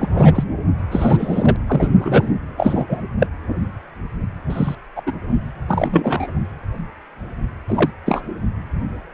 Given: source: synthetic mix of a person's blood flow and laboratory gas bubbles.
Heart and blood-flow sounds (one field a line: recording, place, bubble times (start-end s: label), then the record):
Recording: Doppler ultrasound of blood flow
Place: precordium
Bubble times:
0.00-0.08 s: bubbles
0.15-0.44 s: bubbles
0.92-1.56 s: bubbles
1.67-1.88 s: bubbles
2.00-2.29 s: bubbles
2.57-2.86 s: bubbles
2.89-3.02 s: bubbles
3.19-3.27 s: bubbles
4.49-4.75 s: bubbles
4.96-5.02 s: bubbles
5.06-5.12 s: bubbles
5.68-6.27 s: bubbles
7.67-7.90 s: bubbles
8.06-8.22 s: bubbles
From the record:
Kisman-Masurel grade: 233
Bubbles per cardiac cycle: several, 3 to 8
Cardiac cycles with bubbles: 50 to 99%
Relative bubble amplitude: loud (0.450 to 0.775)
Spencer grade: 3 (all of the cardiac periods contain showers or single bubble signals, but not dominating or overriding the cardiac motion signals)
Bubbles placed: anywhere in the cardiac cycle